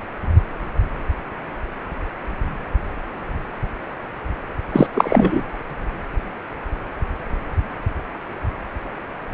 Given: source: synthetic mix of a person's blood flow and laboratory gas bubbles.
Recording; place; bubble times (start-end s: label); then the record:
Doppler ultrasound of blood flow; precordium
4.72-4.87 s: bubbles
4.94-5.47 s: bubbles
From the record:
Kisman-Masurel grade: 213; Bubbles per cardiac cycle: several, 3 to 8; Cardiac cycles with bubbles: 1 to 10%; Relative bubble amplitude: loud (0.450 to 0.775); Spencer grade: 1 (occasional bubble signal discernible with the cardiac motion signal, with majority of cardiac periods free of bubbles); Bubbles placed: anywhere in the cardiac cycle